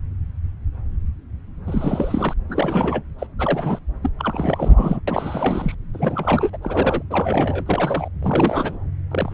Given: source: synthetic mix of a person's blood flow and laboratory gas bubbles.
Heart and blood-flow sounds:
Doppler ultrasound of blood flow; subclavian vein
1.66-2.33 s: bubbles
2.49-3.03 s: bubbles
3.19-3.27 s: bubbles
3.39-3.79 s: bubbles
4.03-4.09 s: bubbles
4.19-5.00 s: bubbles
5.07-5.75 s: bubbles
5.94-6.50 s: bubbles
6.53-6.58 s: bubbles
6.62-7.03 s: bubbles
7.10-8.08 s: bubbles
8.22-8.78 s: bubbles
9.11-9.34 s: bubbles
From the record:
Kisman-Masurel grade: 332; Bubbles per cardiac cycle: rolling drumbeat, 9 or more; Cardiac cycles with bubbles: 50 to 99%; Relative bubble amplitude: moderate (0.250 to 0.450); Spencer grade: 3 (all of the cardiac periods contain showers or single bubble signals, but not dominating or overriding the cardiac motion signals); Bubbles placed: anywhere in the cardiac cycle

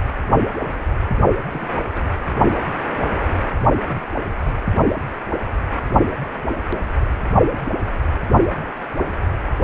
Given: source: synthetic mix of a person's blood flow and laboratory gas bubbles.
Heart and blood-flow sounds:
Doppler ultrasound of blood flow; precordium
1.50-1.69 s: bubbles
1.91-2.05 s: bubbles
3.85-4.01 s: bubbles
4.56-4.60 s: bubbles
From the record:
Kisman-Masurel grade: 121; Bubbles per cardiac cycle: 1 to 2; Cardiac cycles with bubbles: 10 to 50%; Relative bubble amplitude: barely perceptible (0.100 to 0.250); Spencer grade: 2 (many but less than half of the cardiac periods contain bubble signals, singularly or in groups); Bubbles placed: only in the low amplitude regions of the cardiac cycle

